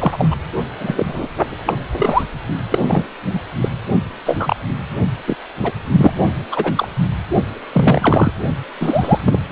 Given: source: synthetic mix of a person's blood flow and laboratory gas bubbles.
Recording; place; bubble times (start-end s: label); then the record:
Doppler ultrasound of blood flow; precordium
0.00-0.37 s: bubbles
0.79-1.29 s: bubbles
1.66-1.74 s: bubbles
1.96-2.23 s: bubbles
2.71-3.03 s: bubbles
3.33-3.41 s: bubbles
3.60-3.69 s: bubbles
4.26-4.56 s: bubbles
5.26-5.36 s: bubbles
5.62-5.71 s: bubbles
5.92-6.13 s: bubbles
6.51-6.88 s: bubbles
7.72-8.31 s: bubbles
8.80-9.21 s: bubbles
9.25-9.39 s: bubbles
From the record:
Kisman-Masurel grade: 243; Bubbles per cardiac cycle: several, 3 to 8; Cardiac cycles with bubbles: 100%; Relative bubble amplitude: loud (0.450 to 0.775); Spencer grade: 3 (all of the cardiac periods contain showers or single bubble signals, but not dominating or overriding the cardiac motion signals); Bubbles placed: only in the low amplitude regions of the cardiac cycle